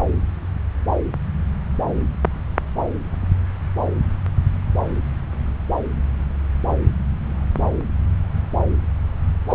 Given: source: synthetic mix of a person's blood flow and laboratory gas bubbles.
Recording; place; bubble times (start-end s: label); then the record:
Doppler ultrasound of blood flow; subclavian vein
9.50-9.55 s: bubbles
From the record:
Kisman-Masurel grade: 223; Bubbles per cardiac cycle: several, 3 to 8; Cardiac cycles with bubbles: 10 to 50%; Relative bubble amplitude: loud (0.450 to 0.775); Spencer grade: 2 (many but less than half of the cardiac periods contain bubble signals, singularly or in groups); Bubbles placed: anywhere in the cardiac cycle